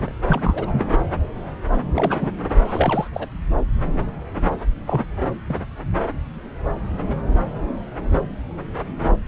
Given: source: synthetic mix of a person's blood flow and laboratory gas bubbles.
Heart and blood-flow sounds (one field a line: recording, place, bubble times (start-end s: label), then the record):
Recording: Doppler ultrasound of blood flow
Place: subclavian vein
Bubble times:
0.00-0.12 s: bubbles
0.28-0.85 s: bubbles
1.94-2.32 s: bubbles
2.64-3.08 s: bubbles
3.13-3.28 s: bubbles
4.86-5.04 s: bubbles
5.47-5.57 s: bubbles
From the record:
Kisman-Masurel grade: 222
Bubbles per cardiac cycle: several, 3 to 8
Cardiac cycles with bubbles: 10 to 50%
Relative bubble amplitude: moderate (0.250 to 0.450)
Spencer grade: 2 (many but less than half of the cardiac periods contain bubble signals, singularly or in groups)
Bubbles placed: anywhere in the cardiac cycle